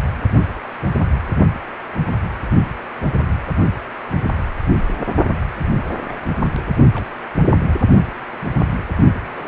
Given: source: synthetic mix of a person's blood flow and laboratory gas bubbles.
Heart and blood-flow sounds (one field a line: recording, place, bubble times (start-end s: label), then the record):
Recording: Doppler ultrasound of blood flow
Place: precordium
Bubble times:
5.41-5.47 s: bubbles
5.87-5.93 s: bubbles
6.09-6.19 s: bubbles
6.45-6.49 s: bubbles
6.54-6.73 s: bubbles
6.94-7.06 s: bubbles
7.52-7.68 s: bubbles
9.34-9.47 s: bubbles
From the record:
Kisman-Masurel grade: 221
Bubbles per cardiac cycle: several, 3 to 8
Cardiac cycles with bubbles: 10 to 50%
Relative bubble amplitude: barely perceptible (0.100 to 0.250)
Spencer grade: 2 (many but less than half of the cardiac periods contain bubble signals, singularly or in groups)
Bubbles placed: only in the low amplitude regions of the cardiac cycle